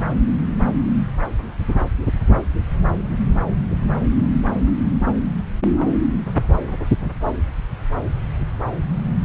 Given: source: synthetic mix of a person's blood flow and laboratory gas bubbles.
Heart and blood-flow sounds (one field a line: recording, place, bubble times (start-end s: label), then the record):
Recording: Doppler ultrasound of blood flow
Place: subclavian vein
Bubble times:
no bubbles
From the record:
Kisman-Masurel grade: 000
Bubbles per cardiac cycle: 0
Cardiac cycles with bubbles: 0%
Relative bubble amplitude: no bubbles discernible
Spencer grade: 0 (complete lack of bubble signals)